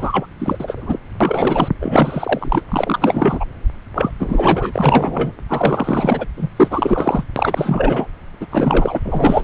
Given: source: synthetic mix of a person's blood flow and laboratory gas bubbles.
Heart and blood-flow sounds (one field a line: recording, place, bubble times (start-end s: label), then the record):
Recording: Doppler ultrasound of blood flow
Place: subclavian vein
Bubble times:
0.00-0.26 s: bubbles
0.39-0.99 s: bubbles
1.21-1.69 s: bubbles
1.81-2.62 s: bubbles
2.68-3.46 s: bubbles
3.95-4.12 s: bubbles
4.19-5.33 s: bubbles
5.49-6.25 s: bubbles
6.37-6.48 s: bubbles
6.56-7.24 s: bubbles
7.36-8.07 s: bubbles
8.40-8.46 s: bubbles
8.50-8.99 s: bubbles
9.04-9.44 s: bubbles
From the record:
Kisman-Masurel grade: 444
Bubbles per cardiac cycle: continuous sound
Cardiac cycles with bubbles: 100%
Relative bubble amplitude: maximal (0.775 to 0.999)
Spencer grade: 4 (maximum detectable bubble signal sounding continuously throughout systole and diastole of every cardiac period, and overriding the amplitude of the normal cardiac signals)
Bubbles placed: anywhere in the cardiac cycle